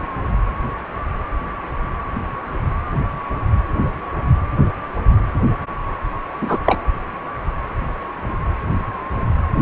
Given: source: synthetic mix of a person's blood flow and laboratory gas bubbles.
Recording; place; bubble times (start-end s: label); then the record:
Doppler ultrasound of blood flow; precordium
6.41-6.60 s: bubbles
6.65-6.81 s: bubbles
From the record:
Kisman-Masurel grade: 213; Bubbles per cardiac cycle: several, 3 to 8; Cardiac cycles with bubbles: 1 to 10%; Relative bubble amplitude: loud (0.450 to 0.775); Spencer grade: 1 (occasional bubble signal discernible with the cardiac motion signal, with majority of cardiac periods free of bubbles); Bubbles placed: anywhere in the cardiac cycle